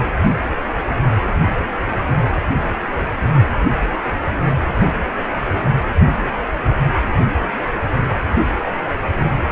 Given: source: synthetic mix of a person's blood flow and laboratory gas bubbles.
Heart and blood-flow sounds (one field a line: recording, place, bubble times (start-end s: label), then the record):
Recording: Doppler ultrasound of blood flow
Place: precordium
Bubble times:
no bubbles
From the record:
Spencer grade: 0 (complete lack of bubble signals)